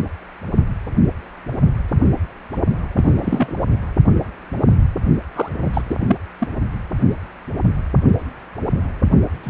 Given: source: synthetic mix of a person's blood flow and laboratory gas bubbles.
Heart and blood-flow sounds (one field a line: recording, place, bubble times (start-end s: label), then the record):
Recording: Doppler ultrasound of blood flow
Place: precordium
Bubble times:
2.96-3.56 s: bubbles
5.35-5.49 s: bubbles
5.61-5.82 s: bubbles
5.89-5.98 s: bubbles
6.00-6.17 s: bubbles
6.40-6.47 s: bubbles
9.43-9.50 s: bubbles
From the record:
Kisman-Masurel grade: 222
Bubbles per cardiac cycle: several, 3 to 8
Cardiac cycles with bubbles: 10 to 50%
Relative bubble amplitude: moderate (0.250 to 0.450)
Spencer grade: 2 (many but less than half of the cardiac periods contain bubble signals, singularly or in groups)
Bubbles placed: only in the low amplitude regions of the cardiac cycle